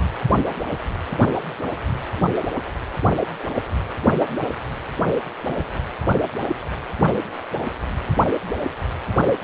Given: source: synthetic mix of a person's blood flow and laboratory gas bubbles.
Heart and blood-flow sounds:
Doppler ultrasound of blood flow; precordium
5.44-5.66 s: bubbles
From the record:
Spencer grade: 1 (occasional bubble signal discernible with the cardiac motion signal, with majority of cardiac periods free of bubbles); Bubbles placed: anywhere in the cardiac cycle

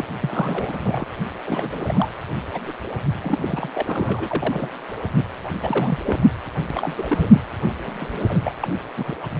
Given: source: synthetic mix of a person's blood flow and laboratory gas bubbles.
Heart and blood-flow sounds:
Doppler ultrasound of blood flow; precordium
0.00-0.05 s: bubbles
0.23-0.77 s: bubbles
0.83-1.06 s: bubbles
1.46-2.08 s: bubbles
2.53-2.60 s: bubbles
2.66-2.74 s: bubbles
3.22-3.70 s: bubbles
3.74-3.83 s: bubbles
3.87-4.69 s: bubbles
5.17-5.27 s: bubbles
5.42-5.50 s: bubbles
5.62-5.99 s: bubbles
6.05-6.19 s: bubbles
6.70-6.94 s: bubbles
6.97-7.29 s: bubbles
7.32-7.42 s: bubbles
7.86-7.94 s: bubbles
8.00-8.42 s: bubbles
8.44-8.54 s: bubbles
8.62-8.68 s: bubbles
8.97-9.15 s: bubbles
9.21-9.27 s: bubbles
From the record:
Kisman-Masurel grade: 332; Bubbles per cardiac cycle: rolling drumbeat, 9 or more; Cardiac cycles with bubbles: 50 to 99%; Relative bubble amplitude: moderate (0.250 to 0.450); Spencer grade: 3 (all of the cardiac periods contain showers or single bubble signals, but not dominating or overriding the cardiac motion signals); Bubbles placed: anywhere in the cardiac cycle

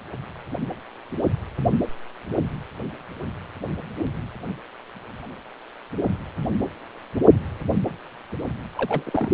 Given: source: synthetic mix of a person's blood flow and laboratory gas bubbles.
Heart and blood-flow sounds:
Doppler ultrasound of blood flow; precordium
8.76-9.03 s: bubbles
9.06-9.11 s: bubbles
9.13-9.33 s: bubbles
From the record:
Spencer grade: 1 (occasional bubble signal discernible with the cardiac motion signal, with majority of cardiac periods free of bubbles); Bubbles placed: anywhere in the cardiac cycle

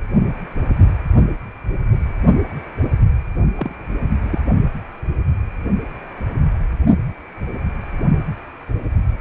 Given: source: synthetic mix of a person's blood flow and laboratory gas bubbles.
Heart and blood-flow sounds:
Doppler ultrasound of blood flow; precordium
3.56-3.75 s: bubbles
4.22-4.41 s: bubbles
From the record:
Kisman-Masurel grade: 112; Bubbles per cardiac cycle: 1 to 2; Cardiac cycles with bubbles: 1 to 10%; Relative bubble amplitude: moderate (0.250 to 0.450); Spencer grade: 1 (occasional bubble signal discernible with the cardiac motion signal, with majority of cardiac periods free of bubbles); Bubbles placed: only in the low amplitude regions of the cardiac cycle

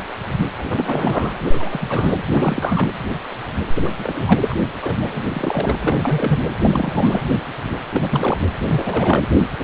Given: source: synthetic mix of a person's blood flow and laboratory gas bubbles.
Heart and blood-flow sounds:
Doppler ultrasound of blood flow; precordium
0.58-0.64 s: bubbles
0.69-1.33 s: bubbles
1.50-2.21 s: bubbles
2.31-2.89 s: bubbles
3.75-3.91 s: bubbles
3.98-4.54 s: bubbles
4.83-4.94 s: bubbles
5.00-5.25 s: bubbles
5.28-5.75 s: bubbles
5.80-6.38 s: bubbles
6.62-7.21 s: bubbles
7.92-8.39 s: bubbles
8.61-9.25 s: bubbles
9.58-9.64 s: bubbles
From the record:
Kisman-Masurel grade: 332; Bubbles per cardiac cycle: rolling drumbeat, 9 or more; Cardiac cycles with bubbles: 50 to 99%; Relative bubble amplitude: moderate (0.250 to 0.450); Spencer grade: 3 (all of the cardiac periods contain showers or single bubble signals, but not dominating or overriding the cardiac motion signals); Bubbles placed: anywhere in the cardiac cycle

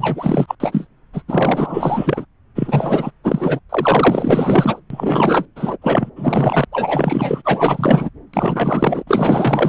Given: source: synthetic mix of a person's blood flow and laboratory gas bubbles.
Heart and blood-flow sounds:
Doppler ultrasound of blood flow; subclavian vein
0.00-0.55 s: bubbles
0.60-0.87 s: bubbles
1.13-1.22 s: bubbles
1.28-2.25 s: bubbles
2.55-3.10 s: bubbles
3.23-3.59 s: bubbles
3.69-4.80 s: bubbles
4.90-5.46 s: bubbles
5.55-5.78 s: bubbles
5.82-6.10 s: bubbles
6.16-6.65 s: bubbles
6.71-8.10 s: bubbles
8.33-9.04 s: bubbles
9.07-9.69 s: bubbles
From the record:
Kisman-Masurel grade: 444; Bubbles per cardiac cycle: continuous sound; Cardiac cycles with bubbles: 100%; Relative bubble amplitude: maximal (0.775 to 0.999); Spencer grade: 4 (maximum detectable bubble signal sounding continuously throughout systole and diastole of every cardiac period, and overriding the amplitude of the normal cardiac signals); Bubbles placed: anywhere in the cardiac cycle

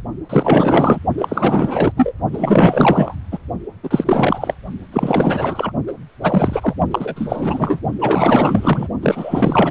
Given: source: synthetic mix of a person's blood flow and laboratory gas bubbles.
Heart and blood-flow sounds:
Doppler ultrasound of blood flow; precordium
0.29-0.99 s: bubbles
1.18-1.92 s: bubbles
1.96-2.12 s: bubbles
2.33-3.15 s: bubbles
3.31-3.39 s: bubbles
3.83-4.55 s: bubbles
4.92-5.72 s: bubbles
5.87-5.92 s: bubbles
6.22-6.75 s: bubbles
6.91-7.82 s: bubbles
7.99-8.88 s: bubbles
9.02-9.71 s: bubbles
From the record:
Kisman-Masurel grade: 444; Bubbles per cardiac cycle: continuous sound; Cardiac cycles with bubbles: 100%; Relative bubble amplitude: maximal (0.775 to 0.999); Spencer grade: 4 (maximum detectable bubble signal sounding continuously throughout systole and diastole of every cardiac period, and overriding the amplitude of the normal cardiac signals); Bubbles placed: only in the low amplitude regions of the cardiac cycle

